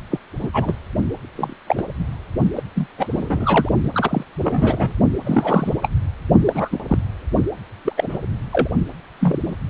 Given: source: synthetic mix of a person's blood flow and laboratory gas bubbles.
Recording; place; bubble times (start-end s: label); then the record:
Doppler ultrasound of blood flow; precordium
0.10-0.19 s: bubbles
0.40-0.49 s: bubbles
0.53-0.74 s: bubbles
1.35-1.54 s: bubbles
1.67-1.83 s: bubbles
2.55-2.62 s: bubbles
2.75-2.88 s: bubbles
2.97-3.06 s: bubbles
3.10-3.69 s: bubbles
3.83-3.91 s: bubbles
3.93-4.24 s: bubbles
4.42-4.94 s: bubbles
5.25-5.74 s: bubbles
5.82-5.88 s: bubbles
6.45-6.80 s: bubbles
6.88-6.98 s: bubbles
7.85-7.93 s: bubbles
7.97-8.18 s: bubbles
8.53-8.69 s: bubbles
9.20-9.55 s: bubbles
From the record:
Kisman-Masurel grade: 242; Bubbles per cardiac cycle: several, 3 to 8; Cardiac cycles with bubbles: 100%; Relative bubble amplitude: moderate (0.250 to 0.450); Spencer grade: 3 (all of the cardiac periods contain showers or single bubble signals, but not dominating or overriding the cardiac motion signals); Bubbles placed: only in the low amplitude regions of the cardiac cycle